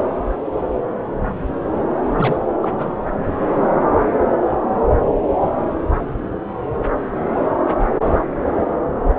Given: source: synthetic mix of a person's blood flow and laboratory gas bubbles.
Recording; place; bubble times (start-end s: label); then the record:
Doppler ultrasound of blood flow; subclavian vein
2.16-2.39 s: bubbles
2.62-2.68 s: bubbles
2.71-3.00 s: bubbles
From the record:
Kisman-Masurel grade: 212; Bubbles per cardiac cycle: several, 3 to 8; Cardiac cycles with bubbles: 1 to 10%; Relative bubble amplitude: moderate (0.250 to 0.450); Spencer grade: 1 (occasional bubble signal discernible with the cardiac motion signal, with majority of cardiac periods free of bubbles); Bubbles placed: anywhere in the cardiac cycle